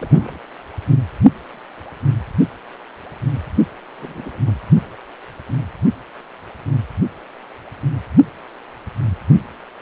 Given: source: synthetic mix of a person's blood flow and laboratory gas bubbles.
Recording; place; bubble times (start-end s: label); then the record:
Doppler ultrasound of blood flow; precordium
0.00-0.39 s: bubbles
3.98-4.41 s: bubbles
4.46-4.53 s: bubbles
From the record:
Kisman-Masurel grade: 221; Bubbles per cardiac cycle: several, 3 to 8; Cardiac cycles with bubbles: 10 to 50%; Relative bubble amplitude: barely perceptible (0.100 to 0.250); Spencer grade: 2 (many but less than half of the cardiac periods contain bubble signals, singularly or in groups); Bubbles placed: only in the low amplitude regions of the cardiac cycle